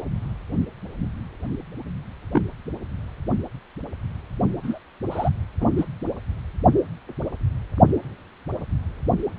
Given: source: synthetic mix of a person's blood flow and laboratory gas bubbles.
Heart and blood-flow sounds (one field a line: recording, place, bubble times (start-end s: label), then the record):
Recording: Doppler ultrasound of blood flow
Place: precordium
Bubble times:
2.32-2.42 s: bubbles
4.63-4.79 s: bubbles
5.10-5.29 s: bubbles
5.61-5.71 s: bubbles
5.78-5.84 s: bubbles
From the record:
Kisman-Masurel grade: 122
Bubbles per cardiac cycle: 1 to 2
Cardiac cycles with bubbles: 10 to 50%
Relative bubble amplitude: moderate (0.250 to 0.450)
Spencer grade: 2 (many but less than half of the cardiac periods contain bubble signals, singularly or in groups)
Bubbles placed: only in the low amplitude regions of the cardiac cycle